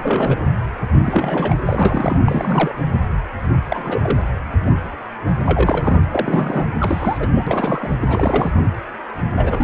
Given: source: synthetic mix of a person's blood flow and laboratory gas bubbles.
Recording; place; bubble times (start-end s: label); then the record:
Doppler ultrasound of blood flow; precordium
0.00-0.38 s: bubbles
1.04-1.55 s: bubbles
1.65-2.19 s: bubbles
2.25-2.76 s: bubbles
3.69-4.21 s: bubbles
5.46-5.97 s: bubbles
6.11-6.67 s: bubbles
6.79-7.29 s: bubbles
7.34-7.44 s: bubbles
7.46-7.91 s: bubbles
8.00-8.52 s: bubbles
9.37-9.64 s: bubbles
From the record:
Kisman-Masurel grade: 332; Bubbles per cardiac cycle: rolling drumbeat, 9 or more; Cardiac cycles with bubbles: 50 to 99%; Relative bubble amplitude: moderate (0.250 to 0.450); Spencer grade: 3 (all of the cardiac periods contain showers or single bubble signals, but not dominating or overriding the cardiac motion signals); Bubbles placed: anywhere in the cardiac cycle